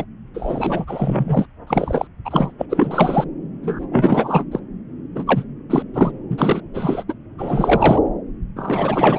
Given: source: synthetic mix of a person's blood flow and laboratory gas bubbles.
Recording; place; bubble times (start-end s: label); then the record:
Doppler ultrasound of blood flow; subclavian vein
0.00-0.04 s: bubbles
0.34-0.85 s: bubbles
0.87-1.46 s: bubbles
1.67-2.08 s: bubbles
2.25-2.52 s: bubbles
2.58-2.66 s: bubbles
2.69-3.24 s: bubbles
3.62-3.86 s: bubbles
3.92-4.45 s: bubbles
4.51-4.59 s: bubbles
5.15-5.24 s: bubbles
5.27-5.44 s: bubbles
5.70-5.83 s: bubbles
5.94-6.12 s: bubbles
6.30-6.61 s: bubbles
6.74-7.04 s: bubbles
7.08-7.15 s: bubbles
7.38-8.00 s: bubbles
8.56-9.19 s: bubbles
From the record:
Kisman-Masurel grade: 343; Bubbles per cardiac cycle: rolling drumbeat, 9 or more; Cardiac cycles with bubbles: 100%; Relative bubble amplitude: loud (0.450 to 0.775); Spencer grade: 3 (all of the cardiac periods contain showers or single bubble signals, but not dominating or overriding the cardiac motion signals); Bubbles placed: anywhere in the cardiac cycle